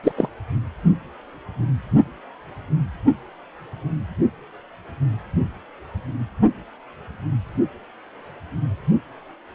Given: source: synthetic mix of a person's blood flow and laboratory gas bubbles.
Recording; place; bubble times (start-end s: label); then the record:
Doppler ultrasound of blood flow; precordium
0.03-0.12 s: bubbles
0.16-0.29 s: bubbles
From the record:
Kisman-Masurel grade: 213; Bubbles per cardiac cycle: several, 3 to 8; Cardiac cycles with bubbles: 1 to 10%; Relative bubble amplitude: loud (0.450 to 0.775); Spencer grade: 1 (occasional bubble signal discernible with the cardiac motion signal, with majority of cardiac periods free of bubbles); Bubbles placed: anywhere in the cardiac cycle